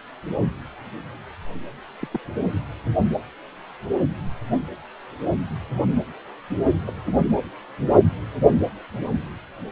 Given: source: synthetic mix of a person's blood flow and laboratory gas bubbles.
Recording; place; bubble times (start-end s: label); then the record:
Doppler ultrasound of blood flow; precordium
2.00-2.07 s: bubbles
2.11-2.20 s: bubbles
6.86-6.92 s: bubbles
7.07-7.14 s: bubbles
From the record:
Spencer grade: 2 (many but less than half of the cardiac periods contain bubble signals, singularly or in groups); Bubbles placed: anywhere in the cardiac cycle